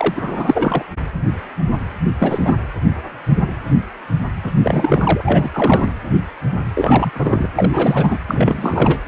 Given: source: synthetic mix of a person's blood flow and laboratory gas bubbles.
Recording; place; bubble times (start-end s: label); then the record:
Doppler ultrasound of blood flow; precordium
0.00-0.82 s: bubbles
2.19-2.56 s: bubbles
4.44-4.51 s: bubbles
4.63-5.50 s: bubbles
5.54-5.91 s: bubbles
6.75-7.11 s: bubbles
7.14-7.48 s: bubbles
7.54-8.19 s: bubbles
8.28-8.99 s: bubbles
From the record:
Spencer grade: 3 (all of the cardiac periods contain showers or single bubble signals, but not dominating or overriding the cardiac motion signals); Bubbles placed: anywhere in the cardiac cycle